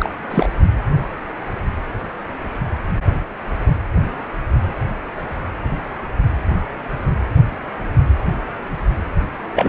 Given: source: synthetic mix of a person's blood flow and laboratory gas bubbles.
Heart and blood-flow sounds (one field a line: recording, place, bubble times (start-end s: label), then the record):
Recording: Doppler ultrasound of blood flow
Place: precordium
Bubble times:
0.00-0.10 s: bubbles
0.30-0.48 s: bubbles
9.55-9.69 s: bubbles
From the record:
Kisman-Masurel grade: 223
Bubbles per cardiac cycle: several, 3 to 8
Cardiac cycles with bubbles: 10 to 50%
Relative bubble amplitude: loud (0.450 to 0.775)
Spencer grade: 2 (many but less than half of the cardiac periods contain bubble signals, singularly or in groups)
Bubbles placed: anywhere in the cardiac cycle